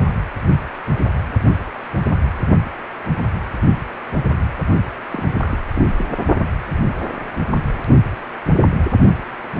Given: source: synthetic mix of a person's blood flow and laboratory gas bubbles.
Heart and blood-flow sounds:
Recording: Doppler ultrasound of blood flow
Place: precordium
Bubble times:
5.11-5.31 s: bubbles
5.41-5.58 s: bubbles
5.74-5.86 s: bubbles
5.98-6.04 s: bubbles
From the record:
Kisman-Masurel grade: 221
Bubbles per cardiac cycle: several, 3 to 8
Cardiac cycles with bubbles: 10 to 50%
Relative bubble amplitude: barely perceptible (0.100 to 0.250)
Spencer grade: 2 (many but less than half of the cardiac periods contain bubble signals, singularly or in groups)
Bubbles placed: only in the low amplitude regions of the cardiac cycle

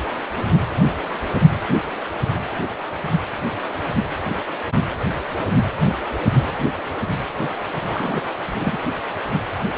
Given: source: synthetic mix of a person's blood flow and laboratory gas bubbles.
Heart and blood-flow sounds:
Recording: Doppler ultrasound of blood flow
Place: precordium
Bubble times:
7.88-8.22 s: bubbles
8.57-8.79 s: bubbles
From the record:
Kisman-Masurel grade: 211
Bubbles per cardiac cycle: several, 3 to 8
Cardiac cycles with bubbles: 1 to 10%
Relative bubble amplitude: barely perceptible (0.100 to 0.250)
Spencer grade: 1 (occasional bubble signal discernible with the cardiac motion signal, with majority of cardiac periods free of bubbles)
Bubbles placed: anywhere in the cardiac cycle

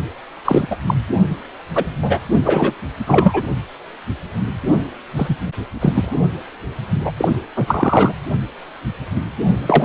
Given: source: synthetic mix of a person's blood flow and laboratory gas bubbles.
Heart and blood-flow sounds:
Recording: Doppler ultrasound of blood flow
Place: precordium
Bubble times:
0.44-0.67 s: bubbles
0.70-0.76 s: bubbles
0.86-0.94 s: bubbles
1.75-1.85 s: bubbles
2.02-2.20 s: bubbles
2.44-2.74 s: bubbles
3.07-3.43 s: bubbles
5.17-5.36 s: bubbles
5.80-6.15 s: bubbles
7.04-7.12 s: bubbles
7.17-7.29 s: bubbles
7.56-8.15 s: bubbles
9.64-9.85 s: bubbles
From the record:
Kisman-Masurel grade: 233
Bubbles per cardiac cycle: several, 3 to 8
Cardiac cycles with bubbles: 50 to 99%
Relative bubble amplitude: loud (0.450 to 0.775)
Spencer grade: 3 (all of the cardiac periods contain showers or single bubble signals, but not dominating or overriding the cardiac motion signals)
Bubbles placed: only in the low amplitude regions of the cardiac cycle

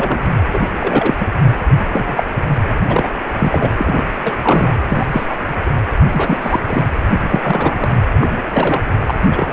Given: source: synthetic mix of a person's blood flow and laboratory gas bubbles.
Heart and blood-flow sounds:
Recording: Doppler ultrasound of blood flow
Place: precordium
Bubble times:
0.00-0.27 s: bubbles
0.52-0.60 s: bubbles
0.80-1.14 s: bubbles
1.20-1.26 s: bubbles
1.92-2.24 s: bubbles
2.88-3.15 s: bubbles
3.38-3.71 s: bubbles
3.77-4.04 s: bubbles
4.22-4.35 s: bubbles
4.38-4.75 s: bubbles
4.89-5.07 s: bubbles
5.12-5.27 s: bubbles
5.30-5.35 s: bubbles
5.65-5.71 s: bubbles
6.12-6.60 s: bubbles
6.65-6.83 s: bubbles
7.22-7.95 s: bubbles
8.20-8.31 s: bubbles
8.50-8.85 s: bubbles
9.05-9.20 s: bubbles
9.31-9.53 s: bubbles
From the record:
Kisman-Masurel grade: 242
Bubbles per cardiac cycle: several, 3 to 8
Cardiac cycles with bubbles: 100%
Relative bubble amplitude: moderate (0.250 to 0.450)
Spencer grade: 3 (all of the cardiac periods contain showers or single bubble signals, but not dominating or overriding the cardiac motion signals)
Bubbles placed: anywhere in the cardiac cycle

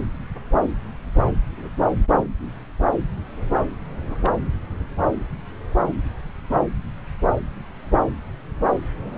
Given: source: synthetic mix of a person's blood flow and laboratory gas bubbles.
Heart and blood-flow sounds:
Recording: Doppler ultrasound of blood flow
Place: subclavian vein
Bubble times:
1.57-1.69 s: bubbles
4.07-4.31 s: bubbles
From the record:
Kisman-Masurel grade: 111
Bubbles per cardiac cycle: 1 to 2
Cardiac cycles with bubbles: 1 to 10%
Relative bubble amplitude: barely perceptible (0.100 to 0.250)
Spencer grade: 1 (occasional bubble signal discernible with the cardiac motion signal, with majority of cardiac periods free of bubbles)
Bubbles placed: anywhere in the cardiac cycle

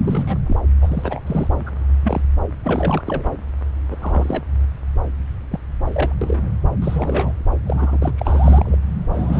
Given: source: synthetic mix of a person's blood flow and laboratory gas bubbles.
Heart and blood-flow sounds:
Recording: Doppler ultrasound of blood flow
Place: subclavian vein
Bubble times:
0.04-0.39 s: bubbles
0.46-0.59 s: bubbles
0.82-1.19 s: bubbles
1.27-1.48 s: bubbles
1.66-1.71 s: bubbles
2.04-2.22 s: bubbles
2.64-3.02 s: bubbles
3.05-3.24 s: bubbles
3.90-3.96 s: bubbles
4.02-4.43 s: bubbles
5.51-5.59 s: bubbles
5.92-6.14 s: bubbles
6.21-6.49 s: bubbles
6.82-7.32 s: bubbles
7.66-7.98 s: bubbles
8.01-8.12 s: bubbles
8.18-8.76 s: bubbles
9.12-9.40 s: bubbles
From the record:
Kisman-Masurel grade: 242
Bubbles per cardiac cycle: several, 3 to 8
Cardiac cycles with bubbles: 100%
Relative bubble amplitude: moderate (0.250 to 0.450)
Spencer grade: 3 (all of the cardiac periods contain showers or single bubble signals, but not dominating or overriding the cardiac motion signals)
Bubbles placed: anywhere in the cardiac cycle

